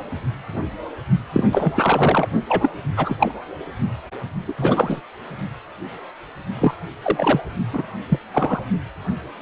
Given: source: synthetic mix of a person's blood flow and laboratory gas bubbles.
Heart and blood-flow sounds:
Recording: Doppler ultrasound of blood flow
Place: precordium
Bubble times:
1.33-1.44 s: bubbles
1.51-2.28 s: bubbles
2.49-2.71 s: bubbles
2.96-3.17 s: bubbles
3.20-3.32 s: bubbles
4.48-4.54 s: bubbles
4.58-5.01 s: bubbles
6.61-6.74 s: bubbles
7.03-7.41 s: bubbles
7.73-7.83 s: bubbles
8.09-8.19 s: bubbles
8.34-8.61 s: bubbles
From the record:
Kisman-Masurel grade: 222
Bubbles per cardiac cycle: several, 3 to 8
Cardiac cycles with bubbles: 10 to 50%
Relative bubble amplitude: moderate (0.250 to 0.450)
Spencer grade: 2 (many but less than half of the cardiac periods contain bubble signals, singularly or in groups)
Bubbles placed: only in the low amplitude regions of the cardiac cycle

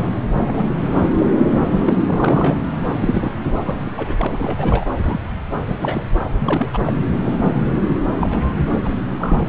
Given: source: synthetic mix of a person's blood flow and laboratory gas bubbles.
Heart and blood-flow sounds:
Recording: Doppler ultrasound of blood flow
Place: subclavian vein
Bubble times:
0.34-0.71 s: bubbles
1.18-1.26 s: bubbles
1.50-1.59 s: bubbles
1.83-1.94 s: bubbles
2.06-2.57 s: bubbles
2.90-3.33 s: bubbles
3.64-3.91 s: bubbles
3.96-4.27 s: bubbles
4.30-4.85 s: bubbles
4.97-5.20 s: bubbles
5.67-6.04 s: bubbles
6.39-6.69 s: bubbles
6.72-6.78 s: bubbles
6.86-6.92 s: bubbles
7.23-7.53 s: bubbles
7.82-7.95 s: bubbles
8.20-8.47 s: bubbles
8.71-8.80 s: bubbles
8.83-8.96 s: bubbles
9.19-9.49 s: bubbles
From the record:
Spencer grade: 3 (all of the cardiac periods contain showers or single bubble signals, but not dominating or overriding the cardiac motion signals)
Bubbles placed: anywhere in the cardiac cycle

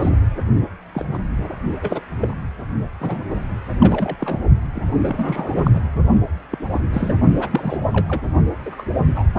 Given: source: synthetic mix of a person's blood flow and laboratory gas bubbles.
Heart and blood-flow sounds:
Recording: Doppler ultrasound of blood flow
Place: precordium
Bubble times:
0.00-0.09 s: bubbles
0.92-1.05 s: bubbles
1.13-1.19 s: bubbles
1.81-2.00 s: bubbles
2.21-2.35 s: bubbles
3.00-3.24 s: bubbles
3.80-4.16 s: bubbles
4.18-4.41 s: bubbles
4.75-4.84 s: bubbles
5.00-5.71 s: bubbles
5.73-5.82 s: bubbles
6.51-6.58 s: bubbles
6.72-6.80 s: bubbles
6.92-7.13 s: bubbles
7.39-7.79 s: bubbles
7.91-8.21 s: bubbles
8.65-8.86 s: bubbles
9.15-9.24 s: bubbles
From the record:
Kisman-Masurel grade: 242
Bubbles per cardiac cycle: several, 3 to 8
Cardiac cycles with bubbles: 100%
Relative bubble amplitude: moderate (0.250 to 0.450)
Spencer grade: 3 (all of the cardiac periods contain showers or single bubble signals, but not dominating or overriding the cardiac motion signals)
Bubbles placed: only in the low amplitude regions of the cardiac cycle

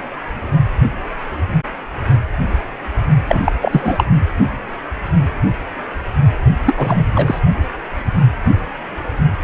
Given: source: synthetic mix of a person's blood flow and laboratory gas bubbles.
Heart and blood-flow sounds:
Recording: Doppler ultrasound of blood flow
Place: precordium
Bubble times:
3.28-3.39 s: bubbles
3.44-3.52 s: bubbles
3.61-4.04 s: bubbles
6.65-7.06 s: bubbles
7.15-7.40 s: bubbles
From the record:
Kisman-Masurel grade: 223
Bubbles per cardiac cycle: several, 3 to 8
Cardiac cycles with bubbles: 10 to 50%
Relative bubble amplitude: loud (0.450 to 0.775)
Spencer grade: 2 (many but less than half of the cardiac periods contain bubble signals, singularly or in groups)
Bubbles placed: only in the low amplitude regions of the cardiac cycle

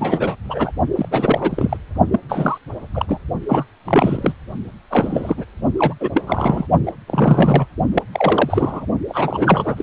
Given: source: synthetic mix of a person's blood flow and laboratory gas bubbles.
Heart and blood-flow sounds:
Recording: Doppler ultrasound of blood flow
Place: precordium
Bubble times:
0.00-0.35 s: bubbles
0.43-0.71 s: bubbles
0.95-1.77 s: bubbles
2.12-2.20 s: bubbles
2.29-2.58 s: bubbles
2.94-3.20 s: bubbles
3.48-3.66 s: bubbles
3.84-4.33 s: bubbles
4.90-5.45 s: bubbles
5.77-5.94 s: bubbles
6.00-6.09 s: bubbles
6.15-6.22 s: bubbles
6.26-6.67 s: bubbles
6.86-6.92 s: bubbles
7.07-7.67 s: bubbles
7.92-8.03 s: bubbles
8.12-8.86 s: bubbles
9.08-9.83 s: bubbles
From the record:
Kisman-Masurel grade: 343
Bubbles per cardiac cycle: rolling drumbeat, 9 or more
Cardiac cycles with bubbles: 100%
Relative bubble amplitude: loud (0.450 to 0.775)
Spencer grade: 3 (all of the cardiac periods contain showers or single bubble signals, but not dominating or overriding the cardiac motion signals)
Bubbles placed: only in the low amplitude regions of the cardiac cycle

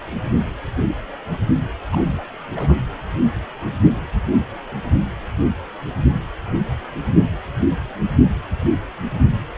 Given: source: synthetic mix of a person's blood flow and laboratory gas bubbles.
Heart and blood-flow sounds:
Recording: Doppler ultrasound of blood flow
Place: precordium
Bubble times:
1.92-2.24 s: bubbles
2.55-2.76 s: bubbles
From the record:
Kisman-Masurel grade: 211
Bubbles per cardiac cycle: several, 3 to 8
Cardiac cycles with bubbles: 1 to 10%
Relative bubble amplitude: barely perceptible (0.100 to 0.250)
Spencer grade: 1 (occasional bubble signal discernible with the cardiac motion signal, with majority of cardiac periods free of bubbles)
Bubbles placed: anywhere in the cardiac cycle

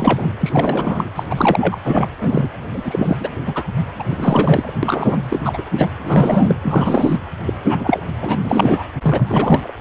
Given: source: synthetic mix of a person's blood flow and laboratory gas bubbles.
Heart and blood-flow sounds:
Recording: Doppler ultrasound of blood flow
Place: precordium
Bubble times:
0.00-0.35 s: bubbles
0.40-1.11 s: bubbles
1.16-1.24 s: bubbles
1.29-1.78 s: bubbles
1.84-2.07 s: bubbles
2.21-2.48 s: bubbles
2.73-3.17 s: bubbles
3.20-3.29 s: bubbles
3.45-3.67 s: bubbles
3.99-4.04 s: bubbles
4.09-4.74 s: bubbles
4.83-5.23 s: bubbles
5.30-5.62 s: bubbles
5.74-5.88 s: bubbles
6.02-6.55 s: bubbles
6.62-7.17 s: bubbles
7.46-7.54 s: bubbles
7.64-8.03 s: bubbles
8.21-8.38 s: bubbles
8.44-8.83 s: bubbles
9.02-9.73 s: bubbles
From the record:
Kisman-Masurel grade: 333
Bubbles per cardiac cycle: rolling drumbeat, 9 or more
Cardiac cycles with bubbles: 50 to 99%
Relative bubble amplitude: loud (0.450 to 0.775)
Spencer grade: 3 (all of the cardiac periods contain showers or single bubble signals, but not dominating or overriding the cardiac motion signals)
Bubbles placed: anywhere in the cardiac cycle

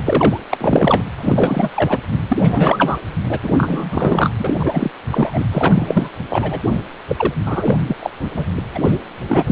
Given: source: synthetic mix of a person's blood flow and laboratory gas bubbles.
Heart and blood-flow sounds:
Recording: Doppler ultrasound of blood flow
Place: precordium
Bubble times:
0.07-0.39 s: bubbles
0.51-0.57 s: bubbles
0.60-1.03 s: bubbles
1.17-1.71 s: bubbles
1.75-1.99 s: bubbles
2.28-2.99 s: bubbles
3.29-3.39 s: bubbles
3.43-3.54 s: bubbles
3.58-4.31 s: bubbles
4.38-4.54 s: bubbles
4.60-4.91 s: bubbles
5.11-5.45 s: bubbles
5.51-6.11 s: bubbles
6.29-6.60 s: bubbles
7.08-7.34 s: bubbles
7.46-7.77 s: bubbles
7.88-7.96 s: bubbles
8.00-8.10 s: bubbles
8.20-8.30 s: bubbles
8.37-8.44 s: bubbles
8.75-8.98 s: bubbles
9.28-9.52 s: bubbles
From the record:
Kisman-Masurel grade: 343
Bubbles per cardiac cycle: rolling drumbeat, 9 or more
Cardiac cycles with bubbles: 100%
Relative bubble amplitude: loud (0.450 to 0.775)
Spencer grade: 3 (all of the cardiac periods contain showers or single bubble signals, but not dominating or overriding the cardiac motion signals)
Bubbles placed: anywhere in the cardiac cycle

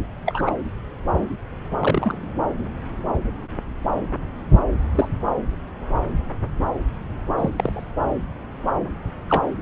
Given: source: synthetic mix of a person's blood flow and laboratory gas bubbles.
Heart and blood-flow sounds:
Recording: Doppler ultrasound of blood flow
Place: subclavian vein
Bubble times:
0.26-0.51 s: bubbles
1.80-2.18 s: bubbles
4.95-5.09 s: bubbles
7.38-7.50 s: bubbles
7.56-7.87 s: bubbles
9.29-9.43 s: bubbles
From the record:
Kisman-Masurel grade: 122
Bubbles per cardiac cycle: 1 to 2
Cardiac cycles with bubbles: 10 to 50%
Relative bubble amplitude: moderate (0.250 to 0.450)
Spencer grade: 2 (many but less than half of the cardiac periods contain bubble signals, singularly or in groups)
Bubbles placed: anywhere in the cardiac cycle

